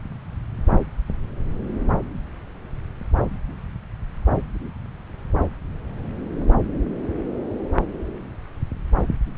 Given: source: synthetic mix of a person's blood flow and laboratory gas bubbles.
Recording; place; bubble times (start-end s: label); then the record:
Doppler ultrasound of blood flow; subclavian vein
no bubbles
From the record:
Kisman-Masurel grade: 000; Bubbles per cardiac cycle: 0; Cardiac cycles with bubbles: 0%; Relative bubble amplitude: no bubbles discernible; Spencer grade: 0 (complete lack of bubble signals)